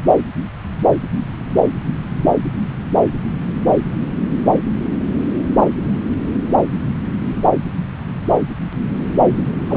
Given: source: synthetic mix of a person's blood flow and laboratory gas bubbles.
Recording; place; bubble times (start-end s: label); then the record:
Doppler ultrasound of blood flow; subclavian vein
9.67-9.77 s: bubbles
From the record:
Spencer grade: 1 (occasional bubble signal discernible with the cardiac motion signal, with majority of cardiac periods free of bubbles); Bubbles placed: anywhere in the cardiac cycle